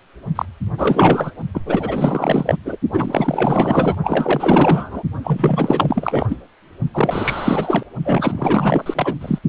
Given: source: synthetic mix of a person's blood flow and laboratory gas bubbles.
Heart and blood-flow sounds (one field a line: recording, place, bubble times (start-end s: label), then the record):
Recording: Doppler ultrasound of blood flow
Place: precordium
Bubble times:
0.36-0.46 s: bubbles
0.77-1.31 s: bubbles
1.54-1.62 s: bubbles
1.65-2.57 s: bubbles
2.65-2.77 s: bubbles
2.93-3.95 s: bubbles
4.03-5.03 s: bubbles
5.23-6.37 s: bubbles
6.93-7.83 s: bubbles
8.05-9.14 s: bubbles
9.21-9.38 s: bubbles
From the record:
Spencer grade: 4 (maximum detectable bubble signal sounding continuously throughout systole and diastole of every cardiac period, and overriding the amplitude of the normal cardiac signals)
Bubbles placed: only in the low amplitude regions of the cardiac cycle